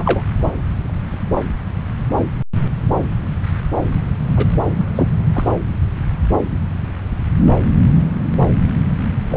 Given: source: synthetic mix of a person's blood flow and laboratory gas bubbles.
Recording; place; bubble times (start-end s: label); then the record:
Doppler ultrasound of blood flow; subclavian vein
0.00-0.22 s: bubbles
0.39-0.51 s: bubbles
4.36-4.46 s: bubbles
4.76-4.85 s: bubbles
4.95-5.08 s: bubbles
5.33-5.50 s: bubbles
9.30-9.36 s: bubbles
From the record:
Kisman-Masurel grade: 222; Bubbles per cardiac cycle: several, 3 to 8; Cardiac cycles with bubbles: 10 to 50%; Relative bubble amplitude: moderate (0.250 to 0.450); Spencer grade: 2 (many but less than half of the cardiac periods contain bubble signals, singularly or in groups); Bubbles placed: anywhere in the cardiac cycle